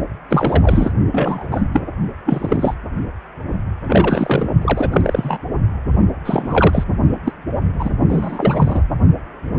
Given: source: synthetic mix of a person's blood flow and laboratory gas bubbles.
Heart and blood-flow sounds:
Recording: Doppler ultrasound of blood flow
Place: precordium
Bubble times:
0.29-0.92 s: bubbles
1.11-1.49 s: bubbles
1.52-1.68 s: bubbles
1.73-1.82 s: bubbles
2.25-2.74 s: bubbles
3.85-4.54 s: bubbles
4.62-5.38 s: bubbles
6.25-6.84 s: bubbles
7.25-7.33 s: bubbles
7.79-7.90 s: bubbles
8.09-8.83 s: bubbles
From the record:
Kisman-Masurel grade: 243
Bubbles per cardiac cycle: several, 3 to 8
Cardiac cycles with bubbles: 100%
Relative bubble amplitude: loud (0.450 to 0.775)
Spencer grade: 3 (all of the cardiac periods contain showers or single bubble signals, but not dominating or overriding the cardiac motion signals)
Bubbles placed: only in the low amplitude regions of the cardiac cycle

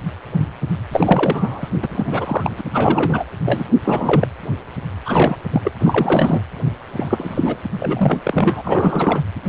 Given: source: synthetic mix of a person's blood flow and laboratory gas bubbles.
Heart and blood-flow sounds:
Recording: Doppler ultrasound of blood flow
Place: precordium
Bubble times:
0.92-1.68 s: bubbles
1.82-2.52 s: bubbles
2.57-2.61 s: bubbles
2.73-3.25 s: bubbles
3.45-3.65 s: bubbles
3.84-4.28 s: bubbles
5.05-5.36 s: bubbles
5.52-5.71 s: bubbles
5.79-6.42 s: bubbles
6.97-7.57 s: bubbles
7.78-9.21 s: bubbles
From the record:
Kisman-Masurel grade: 332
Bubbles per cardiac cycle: rolling drumbeat, 9 or more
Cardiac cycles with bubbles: 50 to 99%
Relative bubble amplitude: moderate (0.250 to 0.450)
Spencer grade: 3 (all of the cardiac periods contain showers or single bubble signals, but not dominating or overriding the cardiac motion signals)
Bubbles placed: anywhere in the cardiac cycle

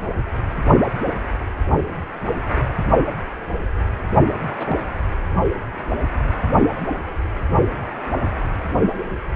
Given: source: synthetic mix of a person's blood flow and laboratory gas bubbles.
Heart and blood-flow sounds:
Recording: Doppler ultrasound of blood flow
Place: precordium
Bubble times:
4.57-4.78 s: bubbles
From the record:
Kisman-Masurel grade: 111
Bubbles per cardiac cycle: 1 to 2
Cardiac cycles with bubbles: 1 to 10%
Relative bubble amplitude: barely perceptible (0.100 to 0.250)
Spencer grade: 1 (occasional bubble signal discernible with the cardiac motion signal, with majority of cardiac periods free of bubbles)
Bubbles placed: only in the low amplitude regions of the cardiac cycle

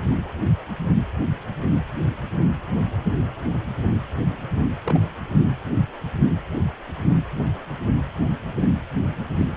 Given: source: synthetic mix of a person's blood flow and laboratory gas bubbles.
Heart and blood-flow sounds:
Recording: Doppler ultrasound of blood flow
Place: precordium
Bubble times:
4.86-5.08 s: bubbles
7.97-8.01 s: bubbles
8.61-8.68 s: bubbles
9.38-9.46 s: bubbles
From the record:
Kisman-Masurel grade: 121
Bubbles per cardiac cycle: 1 to 2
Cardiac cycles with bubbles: 10 to 50%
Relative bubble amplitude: barely perceptible (0.100 to 0.250)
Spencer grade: 2 (many but less than half of the cardiac periods contain bubble signals, singularly or in groups)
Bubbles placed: anywhere in the cardiac cycle

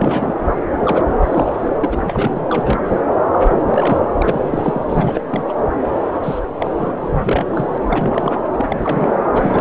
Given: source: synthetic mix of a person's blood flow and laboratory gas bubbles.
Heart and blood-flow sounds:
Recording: Doppler ultrasound of blood flow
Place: subclavian vein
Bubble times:
0.00-0.46 s: bubbles
0.84-1.04 s: bubbles
1.22-1.69 s: bubbles
1.83-1.98 s: bubbles
2.04-2.46 s: bubbles
2.49-2.79 s: bubbles
2.84-3.02 s: bubbles
3.33-3.38 s: bubbles
3.48-3.63 s: bubbles
3.67-4.00 s: bubbles
4.17-4.84 s: bubbles
4.88-5.21 s: bubbles
5.31-5.45 s: bubbles
5.49-5.54 s: bubbles
5.93-5.99 s: bubbles
6.08-6.39 s: bubbles
6.58-6.71 s: bubbles
6.77-6.93 s: bubbles
7.01-7.46 s: bubbles
7.51-7.78 s: bubbles
7.90-8.41 s: bubbles
8.54-8.77 s: bubbles
8.84-9.12 s: bubbles
9.33-9.61 s: bubbles
From the record:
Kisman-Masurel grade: 342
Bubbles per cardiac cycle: rolling drumbeat, 9 or more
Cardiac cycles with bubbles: 100%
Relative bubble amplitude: moderate (0.250 to 0.450)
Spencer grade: 3 (all of the cardiac periods contain showers or single bubble signals, but not dominating or overriding the cardiac motion signals)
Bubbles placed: anywhere in the cardiac cycle

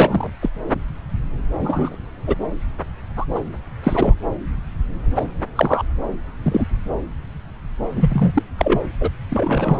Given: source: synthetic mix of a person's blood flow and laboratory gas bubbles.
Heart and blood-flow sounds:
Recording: Doppler ultrasound of blood flow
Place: subclavian vein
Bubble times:
0.00-0.30 s: bubbles
0.42-0.49 s: bubbles
1.59-1.96 s: bubbles
2.27-2.35 s: bubbles
3.16-3.25 s: bubbles
3.35-3.40 s: bubbles
3.83-4.14 s: bubbles
5.15-5.25 s: bubbles
5.55-5.83 s: bubbles
6.42-6.67 s: bubbles
7.96-8.43 s: bubbles
8.57-8.79 s: bubbles
9.01-9.10 s: bubbles
9.30-9.80 s: bubbles
From the record:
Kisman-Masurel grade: 233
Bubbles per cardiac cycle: several, 3 to 8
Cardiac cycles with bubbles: 50 to 99%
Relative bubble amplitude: loud (0.450 to 0.775)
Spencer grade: 3 (all of the cardiac periods contain showers or single bubble signals, but not dominating or overriding the cardiac motion signals)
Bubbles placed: anywhere in the cardiac cycle

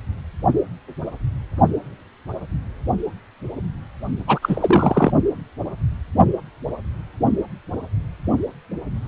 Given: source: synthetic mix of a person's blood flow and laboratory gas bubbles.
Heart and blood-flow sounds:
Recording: Doppler ultrasound of blood flow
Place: precordium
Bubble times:
4.27-4.39 s: bubbles
4.42-5.12 s: bubbles
From the record:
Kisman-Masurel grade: 213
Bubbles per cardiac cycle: several, 3 to 8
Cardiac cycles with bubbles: 1 to 10%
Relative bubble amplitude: loud (0.450 to 0.775)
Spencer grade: 1 (occasional bubble signal discernible with the cardiac motion signal, with majority of cardiac periods free of bubbles)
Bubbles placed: only in the low amplitude regions of the cardiac cycle

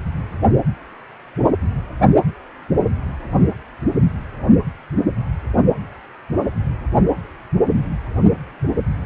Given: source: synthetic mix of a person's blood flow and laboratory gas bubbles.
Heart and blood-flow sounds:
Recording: Doppler ultrasound of blood flow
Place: precordium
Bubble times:
8.64-8.76 s: bubbles
From the record:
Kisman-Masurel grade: 111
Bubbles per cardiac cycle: 1 to 2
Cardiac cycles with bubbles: 1 to 10%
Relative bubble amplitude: barely perceptible (0.100 to 0.250)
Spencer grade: 1 (occasional bubble signal discernible with the cardiac motion signal, with majority of cardiac periods free of bubbles)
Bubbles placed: only in the low amplitude regions of the cardiac cycle

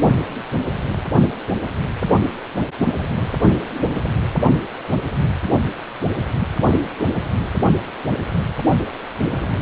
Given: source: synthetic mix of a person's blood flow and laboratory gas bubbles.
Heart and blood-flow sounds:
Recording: Doppler ultrasound of blood flow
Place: precordium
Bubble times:
9.26-9.62 s: bubbles
From the record:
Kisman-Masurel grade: 111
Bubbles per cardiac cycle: 1 to 2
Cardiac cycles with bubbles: 1 to 10%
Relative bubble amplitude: barely perceptible (0.100 to 0.250)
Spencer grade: 1 (occasional bubble signal discernible with the cardiac motion signal, with majority of cardiac periods free of bubbles)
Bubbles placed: only in the low amplitude regions of the cardiac cycle

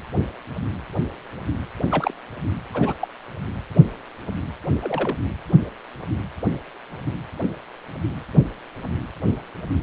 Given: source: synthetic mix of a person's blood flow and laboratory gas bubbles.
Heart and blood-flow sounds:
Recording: Doppler ultrasound of blood flow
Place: precordium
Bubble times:
1.89-2.13 s: bubbles
2.74-2.94 s: bubbles
3.01-3.08 s: bubbles
4.82-5.17 s: bubbles
From the record:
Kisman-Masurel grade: 121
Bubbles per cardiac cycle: 1 to 2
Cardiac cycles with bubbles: 10 to 50%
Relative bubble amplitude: barely perceptible (0.100 to 0.250)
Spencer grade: 2 (many but less than half of the cardiac periods contain bubble signals, singularly or in groups)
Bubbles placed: anywhere in the cardiac cycle

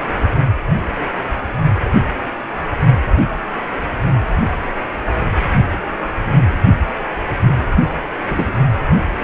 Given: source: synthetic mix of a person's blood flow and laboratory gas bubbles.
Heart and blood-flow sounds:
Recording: Doppler ultrasound of blood flow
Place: precordium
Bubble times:
8.29-8.52 s: bubbles
From the record:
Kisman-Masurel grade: 113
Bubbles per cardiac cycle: 1 to 2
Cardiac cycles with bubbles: 1 to 10%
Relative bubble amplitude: loud (0.450 to 0.775)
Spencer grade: 1 (occasional bubble signal discernible with the cardiac motion signal, with majority of cardiac periods free of bubbles)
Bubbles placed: only in the low amplitude regions of the cardiac cycle

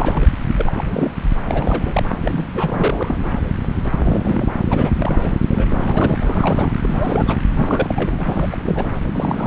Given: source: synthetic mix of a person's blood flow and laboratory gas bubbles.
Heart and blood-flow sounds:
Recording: Doppler ultrasound of blood flow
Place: subclavian vein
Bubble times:
0.00-0.27 s: bubbles
0.49-0.54 s: bubbles
0.57-0.84 s: bubbles
0.89-1.10 s: bubbles
1.47-2.04 s: bubbles
2.23-2.46 s: bubbles
2.55-3.17 s: bubbles
3.97-4.47 s: bubbles
4.70-4.91 s: bubbles
4.97-5.33 s: bubbles
5.48-6.18 s: bubbles
6.22-6.72 s: bubbles
6.83-7.42 s: bubbles
7.52-8.21 s: bubbles
8.25-8.47 s: bubbles
8.50-8.97 s: bubbles
9.10-9.47 s: bubbles
From the record:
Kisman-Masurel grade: 332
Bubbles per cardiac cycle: rolling drumbeat, 9 or more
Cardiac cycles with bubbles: 50 to 99%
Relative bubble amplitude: moderate (0.250 to 0.450)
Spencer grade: 3 (all of the cardiac periods contain showers or single bubble signals, but not dominating or overriding the cardiac motion signals)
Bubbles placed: anywhere in the cardiac cycle

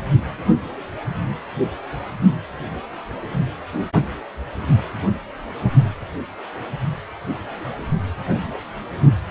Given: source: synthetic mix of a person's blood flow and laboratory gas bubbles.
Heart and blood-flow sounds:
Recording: Doppler ultrasound of blood flow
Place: precordium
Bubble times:
no bubbles
From the record:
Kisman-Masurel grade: 000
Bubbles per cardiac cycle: 0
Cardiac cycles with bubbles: 0%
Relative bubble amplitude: no bubbles discernible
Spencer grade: 0 (complete lack of bubble signals)

